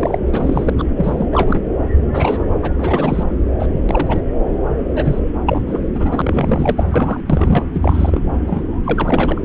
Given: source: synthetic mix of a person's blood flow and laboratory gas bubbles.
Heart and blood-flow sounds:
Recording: Doppler ultrasound of blood flow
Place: subclavian vein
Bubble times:
0.00-0.18 s: bubbles
0.32-0.70 s: bubbles
0.78-0.84 s: bubbles
0.98-1.26 s: bubbles
1.31-1.60 s: bubbles
2.13-2.46 s: bubbles
2.62-3.24 s: bubbles
3.59-3.66 s: bubbles
3.89-4.21 s: bubbles
4.95-5.20 s: bubbles
5.46-5.61 s: bubbles
5.67-5.81 s: bubbles
5.95-6.87 s: bubbles
6.91-7.21 s: bubbles
7.29-7.66 s: bubbles
7.74-8.21 s: bubbles
8.47-8.64 s: bubbles
8.83-9.41 s: bubbles
From the record:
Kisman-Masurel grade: 342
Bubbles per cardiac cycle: rolling drumbeat, 9 or more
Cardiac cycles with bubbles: 100%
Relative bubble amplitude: moderate (0.250 to 0.450)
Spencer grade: 3 (all of the cardiac periods contain showers or single bubble signals, but not dominating or overriding the cardiac motion signals)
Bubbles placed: anywhere in the cardiac cycle

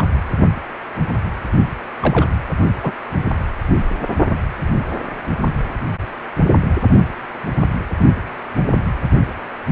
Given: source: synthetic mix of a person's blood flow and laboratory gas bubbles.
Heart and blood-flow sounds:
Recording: Doppler ultrasound of blood flow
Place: precordium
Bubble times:
0.00-0.04 s: bubbles
2.00-2.29 s: bubbles
2.83-2.92 s: bubbles
From the record:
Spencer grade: 2 (many but less than half of the cardiac periods contain bubble signals, singularly or in groups)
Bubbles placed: anywhere in the cardiac cycle

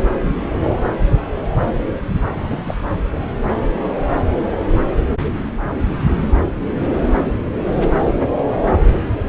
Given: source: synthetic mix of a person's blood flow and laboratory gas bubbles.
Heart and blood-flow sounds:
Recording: Doppler ultrasound of blood flow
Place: subclavian vein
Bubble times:
2.33-2.75 s: bubbles
From the record:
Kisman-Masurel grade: 112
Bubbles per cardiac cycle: 1 to 2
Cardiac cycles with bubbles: 1 to 10%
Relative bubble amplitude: moderate (0.250 to 0.450)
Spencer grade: 1 (occasional bubble signal discernible with the cardiac motion signal, with majority of cardiac periods free of bubbles)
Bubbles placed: anywhere in the cardiac cycle

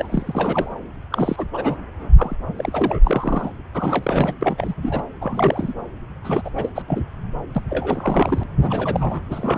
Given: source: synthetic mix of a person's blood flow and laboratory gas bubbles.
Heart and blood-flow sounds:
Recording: Doppler ultrasound of blood flow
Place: subclavian vein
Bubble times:
0.00-0.78 s: bubbles
1.12-1.47 s: bubbles
1.53-1.76 s: bubbles
2.17-2.34 s: bubbles
2.47-2.53 s: bubbles
2.57-2.99 s: bubbles
3.04-3.52 s: bubbles
3.74-4.33 s: bubbles
4.41-4.75 s: bubbles
4.82-5.02 s: bubbles
5.21-5.74 s: bubbles
6.24-6.42 s: bubbles
6.44-6.50 s: bubbles
6.55-6.72 s: bubbles
6.75-6.82 s: bubbles
6.87-7.08 s: bubbles
7.55-7.62 s: bubbles
7.69-8.44 s: bubbles
8.61-9.22 s: bubbles
9.30-9.58 s: bubbles
From the record:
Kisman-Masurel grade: 342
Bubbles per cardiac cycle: rolling drumbeat, 9 or more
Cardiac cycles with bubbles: 100%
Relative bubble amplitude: moderate (0.250 to 0.450)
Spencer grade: 3 (all of the cardiac periods contain showers or single bubble signals, but not dominating or overriding the cardiac motion signals)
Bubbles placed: anywhere in the cardiac cycle

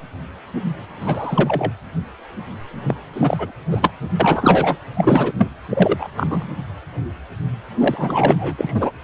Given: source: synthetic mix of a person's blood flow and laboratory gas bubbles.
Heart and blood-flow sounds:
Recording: Doppler ultrasound of blood flow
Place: precordium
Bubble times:
1.01-1.72 s: bubbles
2.87-2.95 s: bubbles
3.13-3.51 s: bubbles
3.70-3.93 s: bubbles
4.19-4.76 s: bubbles
4.96-5.32 s: bubbles
5.38-5.48 s: bubbles
5.69-6.08 s: bubbles
6.17-6.48 s: bubbles
7.80-8.91 s: bubbles
From the record:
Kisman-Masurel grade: 223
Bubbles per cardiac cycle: several, 3 to 8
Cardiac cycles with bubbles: 10 to 50%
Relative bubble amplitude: loud (0.450 to 0.775)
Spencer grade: 2 (many but less than half of the cardiac periods contain bubble signals, singularly or in groups)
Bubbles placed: anywhere in the cardiac cycle

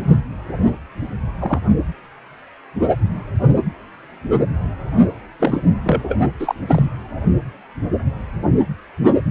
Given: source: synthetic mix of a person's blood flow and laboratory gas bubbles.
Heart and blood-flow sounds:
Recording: Doppler ultrasound of blood flow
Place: precordium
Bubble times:
0.07-0.15 s: bubbles
1.39-1.60 s: bubbles
5.39-5.62 s: bubbles
5.85-6.15 s: bubbles
6.39-6.54 s: bubbles
6.67-6.88 s: bubbles
From the record:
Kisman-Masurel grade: 223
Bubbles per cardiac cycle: several, 3 to 8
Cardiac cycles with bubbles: 10 to 50%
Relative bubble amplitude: loud (0.450 to 0.775)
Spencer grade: 2 (many but less than half of the cardiac periods contain bubble signals, singularly or in groups)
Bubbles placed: only in the low amplitude regions of the cardiac cycle

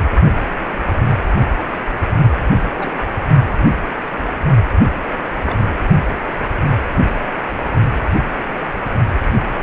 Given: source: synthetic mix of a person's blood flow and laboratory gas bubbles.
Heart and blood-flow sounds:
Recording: Doppler ultrasound of blood flow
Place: precordium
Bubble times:
2.61-2.90 s: bubbles
5.46-5.58 s: bubbles
From the record:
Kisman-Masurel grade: 122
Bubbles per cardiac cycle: 1 to 2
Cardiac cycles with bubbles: 10 to 50%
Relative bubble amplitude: moderate (0.250 to 0.450)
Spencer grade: 2 (many but less than half of the cardiac periods contain bubble signals, singularly or in groups)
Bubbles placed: only in the low amplitude regions of the cardiac cycle

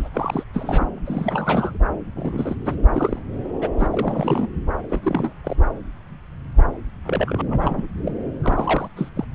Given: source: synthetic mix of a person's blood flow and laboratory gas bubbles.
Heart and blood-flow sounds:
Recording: Doppler ultrasound of blood flow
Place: subclavian vein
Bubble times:
0.00-0.09 s: bubbles
0.13-0.44 s: bubbles
0.53-0.88 s: bubbles
1.05-1.78 s: bubbles
2.15-2.56 s: bubbles
2.65-2.75 s: bubbles
2.94-3.19 s: bubbles
3.61-3.69 s: bubbles
3.78-3.88 s: bubbles
3.91-4.49 s: bubbles
4.89-5.33 s: bubbles
5.44-5.62 s: bubbles
7.04-7.41 s: bubbles
7.47-7.87 s: bubbles
8.04-8.12 s: bubbles
8.42-8.88 s: bubbles
8.96-9.09 s: bubbles
9.15-9.24 s: bubbles
From the record:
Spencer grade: 3 (all of the cardiac periods contain showers or single bubble signals, but not dominating or overriding the cardiac motion signals)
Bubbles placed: anywhere in the cardiac cycle

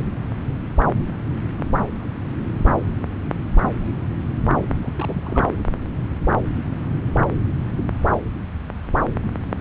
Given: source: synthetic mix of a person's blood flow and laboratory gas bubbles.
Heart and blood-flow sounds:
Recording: Doppler ultrasound of blood flow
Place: subclavian vein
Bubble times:
4.83-5.46 s: bubbles
From the record:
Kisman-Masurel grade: 211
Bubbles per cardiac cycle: several, 3 to 8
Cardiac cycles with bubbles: 1 to 10%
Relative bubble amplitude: barely perceptible (0.100 to 0.250)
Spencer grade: 1 (occasional bubble signal discernible with the cardiac motion signal, with majority of cardiac periods free of bubbles)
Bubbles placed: anywhere in the cardiac cycle

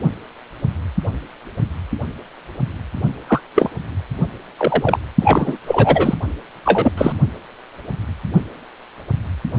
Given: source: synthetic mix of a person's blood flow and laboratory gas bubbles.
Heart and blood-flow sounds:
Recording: Doppler ultrasound of blood flow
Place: precordium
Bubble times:
3.28-3.40 s: bubbles
3.56-3.70 s: bubbles
4.57-4.99 s: bubbles
5.21-5.58 s: bubbles
5.67-6.14 s: bubbles
6.65-6.92 s: bubbles
6.97-7.12 s: bubbles
From the record:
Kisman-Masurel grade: 223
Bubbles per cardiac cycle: several, 3 to 8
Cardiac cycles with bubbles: 10 to 50%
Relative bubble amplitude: loud (0.450 to 0.775)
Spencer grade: 2 (many but less than half of the cardiac periods contain bubble signals, singularly or in groups)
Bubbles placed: only in the low amplitude regions of the cardiac cycle

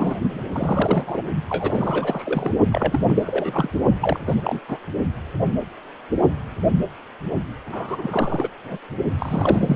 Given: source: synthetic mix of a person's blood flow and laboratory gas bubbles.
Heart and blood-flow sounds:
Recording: Doppler ultrasound of blood flow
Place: precordium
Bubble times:
0.00-0.17 s: bubbles
0.53-1.24 s: bubbles
1.49-2.51 s: bubbles
2.71-3.00 s: bubbles
3.07-3.68 s: bubbles
4.01-4.19 s: bubbles
4.27-4.42 s: bubbles
4.44-4.60 s: bubbles
4.68-4.77 s: bubbles
7.67-8.48 s: bubbles
8.64-8.78 s: bubbles
9.19-9.76 s: bubbles
From the record:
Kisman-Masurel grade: 332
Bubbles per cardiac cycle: rolling drumbeat, 9 or more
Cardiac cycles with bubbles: 50 to 99%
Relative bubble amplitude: moderate (0.250 to 0.450)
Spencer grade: 3 (all of the cardiac periods contain showers or single bubble signals, but not dominating or overriding the cardiac motion signals)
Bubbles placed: only in the low amplitude regions of the cardiac cycle

